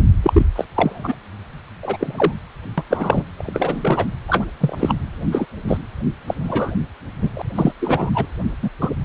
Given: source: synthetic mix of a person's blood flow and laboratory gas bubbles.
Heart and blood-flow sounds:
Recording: Doppler ultrasound of blood flow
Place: precordium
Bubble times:
0.00-0.03 s: bubbles
0.22-0.46 s: bubbles
0.55-0.65 s: bubbles
0.75-1.14 s: bubbles
1.82-2.35 s: bubbles
2.77-2.84 s: bubbles
2.90-3.26 s: bubbles
3.36-4.05 s: bubbles
4.28-4.45 s: bubbles
4.60-4.95 s: bubbles
5.31-5.46 s: bubbles
5.67-5.77 s: bubbles
6.27-6.34 s: bubbles
6.43-6.72 s: bubbles
7.21-7.30 s: bubbles
7.35-7.42 s: bubbles
7.55-7.73 s: bubbles
7.79-8.11 s: bubbles
8.14-8.26 s: bubbles
8.62-8.70 s: bubbles
8.81-8.91 s: bubbles
From the record:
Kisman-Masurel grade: 233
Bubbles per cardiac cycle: several, 3 to 8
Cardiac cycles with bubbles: 50 to 99%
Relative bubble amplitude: loud (0.450 to 0.775)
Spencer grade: 3 (all of the cardiac periods contain showers or single bubble signals, but not dominating or overriding the cardiac motion signals)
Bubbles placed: anywhere in the cardiac cycle

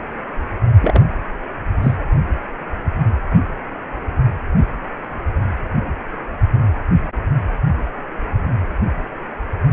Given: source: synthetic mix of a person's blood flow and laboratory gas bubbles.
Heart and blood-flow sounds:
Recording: Doppler ultrasound of blood flow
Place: precordium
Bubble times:
0.81-1.01 s: bubbles
1.82-1.96 s: bubbles
From the record:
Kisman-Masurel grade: 212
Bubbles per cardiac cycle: several, 3 to 8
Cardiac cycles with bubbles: 1 to 10%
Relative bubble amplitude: moderate (0.250 to 0.450)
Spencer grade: 1 (occasional bubble signal discernible with the cardiac motion signal, with majority of cardiac periods free of bubbles)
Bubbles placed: anywhere in the cardiac cycle

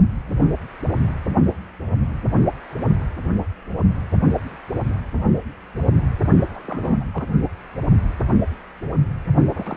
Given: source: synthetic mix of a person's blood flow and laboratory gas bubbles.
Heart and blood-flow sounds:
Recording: Doppler ultrasound of blood flow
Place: precordium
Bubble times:
6.55-6.62 s: bubbles
6.65-6.97 s: bubbles
7.00-7.04 s: bubbles
7.14-7.28 s: bubbles
9.53-9.76 s: bubbles
From the record:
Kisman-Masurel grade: 221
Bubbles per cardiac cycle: several, 3 to 8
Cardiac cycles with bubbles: 10 to 50%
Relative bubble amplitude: barely perceptible (0.100 to 0.250)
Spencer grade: 2 (many but less than half of the cardiac periods contain bubble signals, singularly or in groups)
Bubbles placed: only in the low amplitude regions of the cardiac cycle

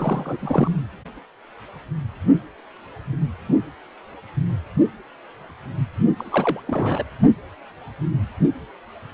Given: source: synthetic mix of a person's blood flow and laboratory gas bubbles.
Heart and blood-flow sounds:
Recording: Doppler ultrasound of blood flow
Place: precordium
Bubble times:
0.00-0.37 s: bubbles
0.39-0.71 s: bubbles
6.17-6.60 s: bubbles
6.67-7.04 s: bubbles
From the record:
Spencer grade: 2 (many but less than half of the cardiac periods contain bubble signals, singularly or in groups)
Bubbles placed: only in the low amplitude regions of the cardiac cycle

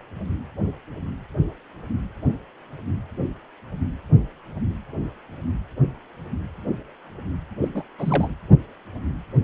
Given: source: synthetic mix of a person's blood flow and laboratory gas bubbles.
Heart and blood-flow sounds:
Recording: Doppler ultrasound of blood flow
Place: precordium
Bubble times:
7.61-7.68 s: bubbles
7.74-7.83 s: bubbles
7.98-8.34 s: bubbles
From the record:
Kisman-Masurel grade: 212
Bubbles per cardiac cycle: several, 3 to 8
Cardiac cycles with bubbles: 1 to 10%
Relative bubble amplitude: moderate (0.250 to 0.450)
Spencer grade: 1 (occasional bubble signal discernible with the cardiac motion signal, with majority of cardiac periods free of bubbles)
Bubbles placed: anywhere in the cardiac cycle

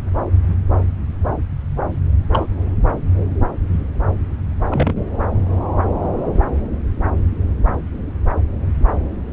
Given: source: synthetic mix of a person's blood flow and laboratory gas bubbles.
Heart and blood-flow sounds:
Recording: Doppler ultrasound of blood flow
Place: subclavian vein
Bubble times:
2.32-2.47 s: bubbles
4.70-5.03 s: bubbles
From the record:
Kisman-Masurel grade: 122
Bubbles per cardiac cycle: 1 to 2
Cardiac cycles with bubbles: 10 to 50%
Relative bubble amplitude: moderate (0.250 to 0.450)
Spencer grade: 2 (many but less than half of the cardiac periods contain bubble signals, singularly or in groups)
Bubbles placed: anywhere in the cardiac cycle

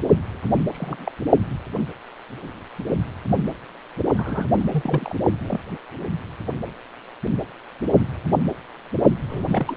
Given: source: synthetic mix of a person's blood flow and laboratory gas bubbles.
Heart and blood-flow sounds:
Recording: Doppler ultrasound of blood flow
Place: precordium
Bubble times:
0.72-1.11 s: bubbles
4.17-4.47 s: bubbles
4.59-4.63 s: bubbles
4.71-5.15 s: bubbles
5.42-5.60 s: bubbles
9.29-9.77 s: bubbles
From the record:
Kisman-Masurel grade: 221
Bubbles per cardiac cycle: several, 3 to 8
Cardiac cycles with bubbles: 10 to 50%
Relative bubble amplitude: barely perceptible (0.100 to 0.250)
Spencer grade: 2 (many but less than half of the cardiac periods contain bubble signals, singularly or in groups)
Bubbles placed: only in the low amplitude regions of the cardiac cycle

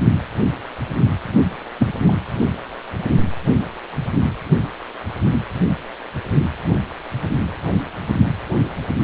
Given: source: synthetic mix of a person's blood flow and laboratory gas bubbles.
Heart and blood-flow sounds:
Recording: Doppler ultrasound of blood flow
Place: precordium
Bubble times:
1.79-1.93 s: bubbles
2.08-2.13 s: bubbles
From the record:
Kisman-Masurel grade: 113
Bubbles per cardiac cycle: 1 to 2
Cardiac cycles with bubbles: 1 to 10%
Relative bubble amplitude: loud (0.450 to 0.775)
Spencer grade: 1 (occasional bubble signal discernible with the cardiac motion signal, with majority of cardiac periods free of bubbles)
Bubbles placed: anywhere in the cardiac cycle

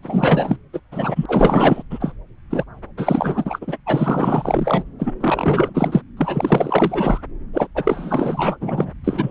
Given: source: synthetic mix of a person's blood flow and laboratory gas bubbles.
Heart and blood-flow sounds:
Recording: Doppler ultrasound of blood flow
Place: subclavian vein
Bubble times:
0.02-0.58 s: bubbles
0.73-0.80 s: bubbles
0.92-1.26 s: bubbles
1.28-1.82 s: bubbles
1.90-2.13 s: bubbles
2.50-2.64 s: bubbles
2.97-3.77 s: bubbles
3.86-4.83 s: bubbles
4.99-5.12 s: bubbles
5.20-6.01 s: bubbles
6.17-7.21 s: bubbles
7.53-7.67 s: bubbles
7.75-8.56 s: bubbles
8.60-8.91 s: bubbles
9.04-9.31 s: bubbles
From the record:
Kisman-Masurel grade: 444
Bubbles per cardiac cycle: continuous sound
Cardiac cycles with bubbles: 100%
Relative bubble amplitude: maximal (0.775 to 0.999)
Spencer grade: 4 (maximum detectable bubble signal sounding continuously throughout systole and diastole of every cardiac period, and overriding the amplitude of the normal cardiac signals)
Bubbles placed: anywhere in the cardiac cycle

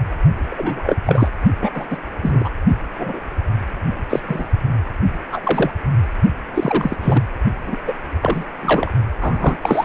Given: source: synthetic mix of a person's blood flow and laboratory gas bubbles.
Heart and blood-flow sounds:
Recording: Doppler ultrasound of blood flow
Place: precordium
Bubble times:
0.50-0.96 s: bubbles
1.06-1.31 s: bubbles
1.61-1.71 s: bubbles
1.73-1.88 s: bubbles
1.90-1.98 s: bubbles
2.22-2.50 s: bubbles
2.98-3.19 s: bubbles
4.09-4.20 s: bubbles
4.28-4.45 s: bubbles
5.32-5.71 s: bubbles
6.54-6.97 s: bubbles
7.01-7.22 s: bubbles
7.66-7.78 s: bubbles
7.86-7.93 s: bubbles
8.21-8.45 s: bubbles
8.62-8.91 s: bubbles
9.21-9.57 s: bubbles
9.62-9.85 s: bubbles
From the record:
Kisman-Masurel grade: 243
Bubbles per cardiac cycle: several, 3 to 8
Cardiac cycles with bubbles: 100%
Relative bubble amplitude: loud (0.450 to 0.775)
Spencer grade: 3 (all of the cardiac periods contain showers or single bubble signals, but not dominating or overriding the cardiac motion signals)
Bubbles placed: only in the low amplitude regions of the cardiac cycle

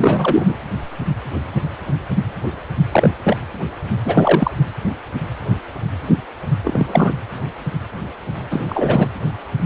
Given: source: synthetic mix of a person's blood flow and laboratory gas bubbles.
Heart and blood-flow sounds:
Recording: Doppler ultrasound of blood flow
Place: precordium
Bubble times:
0.00-0.55 s: bubbles
2.91-3.09 s: bubbles
3.23-3.37 s: bubbles
4.04-4.51 s: bubbles
6.64-7.15 s: bubbles
8.50-8.65 s: bubbles
8.68-9.08 s: bubbles
From the record:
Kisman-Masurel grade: 223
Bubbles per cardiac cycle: several, 3 to 8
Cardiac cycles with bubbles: 10 to 50%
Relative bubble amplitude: loud (0.450 to 0.775)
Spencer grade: 2 (many but less than half of the cardiac periods contain bubble signals, singularly or in groups)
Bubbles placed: anywhere in the cardiac cycle

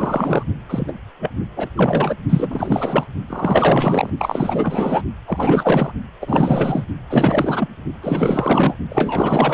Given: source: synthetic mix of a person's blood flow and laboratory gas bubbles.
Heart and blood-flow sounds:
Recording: Doppler ultrasound of blood flow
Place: precordium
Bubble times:
0.00-0.43 s: bubbles
0.69-0.93 s: bubbles
1.20-1.30 s: bubbles
1.56-1.69 s: bubbles
1.76-2.16 s: bubbles
2.29-3.07 s: bubbles
3.27-4.10 s: bubbles
4.17-5.02 s: bubbles
5.27-5.92 s: bubbles
6.21-6.84 s: bubbles
7.10-7.69 s: bubbles
8.02-8.75 s: bubbles
8.89-9.54 s: bubbles
From the record:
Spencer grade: 4 (maximum detectable bubble signal sounding continuously throughout systole and diastole of every cardiac period, and overriding the amplitude of the normal cardiac signals)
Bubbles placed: only in the low amplitude regions of the cardiac cycle

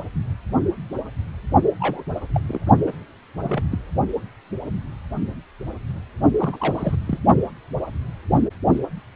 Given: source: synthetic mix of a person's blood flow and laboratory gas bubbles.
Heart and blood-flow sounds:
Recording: Doppler ultrasound of blood flow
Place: precordium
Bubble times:
1.80-2.02 s: bubbles
2.33-2.41 s: bubbles
2.48-2.60 s: bubbles
2.85-2.92 s: bubbles
3.36-3.63 s: bubbles
3.71-3.79 s: bubbles
6.40-6.96 s: bubbles
7.06-7.19 s: bubbles
From the record:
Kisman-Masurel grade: 222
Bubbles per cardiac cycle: several, 3 to 8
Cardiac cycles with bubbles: 10 to 50%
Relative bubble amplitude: moderate (0.250 to 0.450)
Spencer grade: 2 (many but less than half of the cardiac periods contain bubble signals, singularly or in groups)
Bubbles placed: only in the low amplitude regions of the cardiac cycle

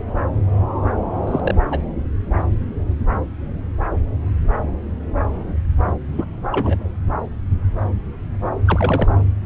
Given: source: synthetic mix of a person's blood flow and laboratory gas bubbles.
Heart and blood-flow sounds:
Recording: Doppler ultrasound of blood flow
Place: subclavian vein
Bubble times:
1.27-1.40 s: bubbles
1.44-1.55 s: bubbles
1.70-1.80 s: bubbles
2.38-2.44 s: bubbles
6.07-6.25 s: bubbles
6.50-6.91 s: bubbles
8.65-9.12 s: bubbles
From the record:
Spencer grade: 2 (many but less than half of the cardiac periods contain bubble signals, singularly or in groups)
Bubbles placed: anywhere in the cardiac cycle

